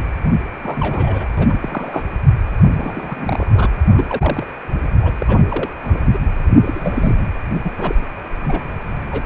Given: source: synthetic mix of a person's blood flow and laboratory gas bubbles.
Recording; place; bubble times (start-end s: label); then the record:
Doppler ultrasound of blood flow; precordium
0.62-1.27 s: bubbles
1.37-1.55 s: bubbles
1.59-2.04 s: bubbles
2.74-3.68 s: bubbles
3.92-4.46 s: bubbles
5.02-5.12 s: bubbles
5.18-5.43 s: bubbles
5.49-5.69 s: bubbles
5.83-6.00 s: bubbles
6.12-6.18 s: bubbles
6.64-7.15 s: bubbles
7.63-7.71 s: bubbles
7.78-7.95 s: bubbles
8.02-8.06 s: bubbles
8.43-8.75 s: bubbles
9.11-9.23 s: bubbles
From the record:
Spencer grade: 3 (all of the cardiac periods contain showers or single bubble signals, but not dominating or overriding the cardiac motion signals); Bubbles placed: anywhere in the cardiac cycle